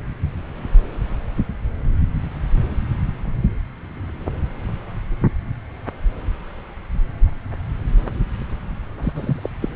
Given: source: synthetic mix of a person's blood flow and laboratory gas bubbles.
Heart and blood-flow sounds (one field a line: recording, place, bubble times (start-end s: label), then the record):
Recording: Doppler ultrasound of blood flow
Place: subclavian vein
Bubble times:
9.01-9.49 s: bubbles
9.61-9.69 s: bubbles
From the record:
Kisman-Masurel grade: 212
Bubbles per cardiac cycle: several, 3 to 8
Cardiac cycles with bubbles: 1 to 10%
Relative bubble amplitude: moderate (0.250 to 0.450)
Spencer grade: 1 (occasional bubble signal discernible with the cardiac motion signal, with majority of cardiac periods free of bubbles)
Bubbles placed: anywhere in the cardiac cycle